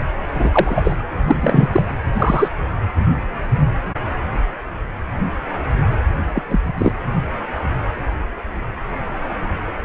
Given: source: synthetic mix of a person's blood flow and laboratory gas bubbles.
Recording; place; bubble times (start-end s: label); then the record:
Doppler ultrasound of blood flow; precordium
0.34-0.96 s: bubbles
1.24-1.69 s: bubbles
1.72-1.82 s: bubbles
2.17-2.48 s: bubbles
6.34-6.43 s: bubbles
6.48-6.60 s: bubbles
6.77-6.92 s: bubbles
From the record:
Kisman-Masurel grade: 223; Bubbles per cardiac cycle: several, 3 to 8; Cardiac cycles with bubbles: 10 to 50%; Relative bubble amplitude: loud (0.450 to 0.775); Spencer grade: 2 (many but less than half of the cardiac periods contain bubble signals, singularly or in groups); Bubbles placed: anywhere in the cardiac cycle